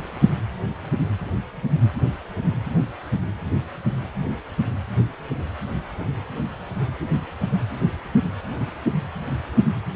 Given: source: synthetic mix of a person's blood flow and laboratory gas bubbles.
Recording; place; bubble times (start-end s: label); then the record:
Doppler ultrasound of blood flow; precordium
no bubbles
From the record:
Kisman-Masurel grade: 000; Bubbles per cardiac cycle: 0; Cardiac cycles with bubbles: 0%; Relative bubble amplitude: no bubbles discernible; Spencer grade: 0 (complete lack of bubble signals)